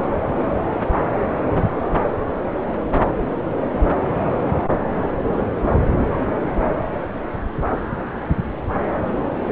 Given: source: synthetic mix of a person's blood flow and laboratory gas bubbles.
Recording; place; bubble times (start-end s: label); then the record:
Doppler ultrasound of blood flow; subclavian vein
6.10-6.20 s: bubbles
From the record:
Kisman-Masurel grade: 111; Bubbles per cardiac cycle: 1 to 2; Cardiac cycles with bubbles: 1 to 10%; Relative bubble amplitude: barely perceptible (0.100 to 0.250); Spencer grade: 1 (occasional bubble signal discernible with the cardiac motion signal, with majority of cardiac periods free of bubbles); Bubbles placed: anywhere in the cardiac cycle